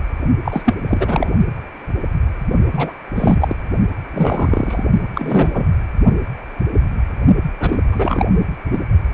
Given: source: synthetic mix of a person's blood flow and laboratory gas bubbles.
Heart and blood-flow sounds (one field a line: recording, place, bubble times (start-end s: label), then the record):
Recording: Doppler ultrasound of blood flow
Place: precordium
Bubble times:
0.45-0.74 s: bubbles
0.88-1.32 s: bubbles
2.73-2.93 s: bubbles
3.15-3.56 s: bubbles
4.13-4.83 s: bubbles
5.14-5.67 s: bubbles
7.59-7.83 s: bubbles
7.92-8.26 s: bubbles
8.71-8.82 s: bubbles
From the record:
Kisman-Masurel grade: 333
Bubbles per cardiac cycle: rolling drumbeat, 9 or more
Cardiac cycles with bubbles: 50 to 99%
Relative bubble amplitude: loud (0.450 to 0.775)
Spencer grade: 3 (all of the cardiac periods contain showers or single bubble signals, but not dominating or overriding the cardiac motion signals)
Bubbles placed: only in the low amplitude regions of the cardiac cycle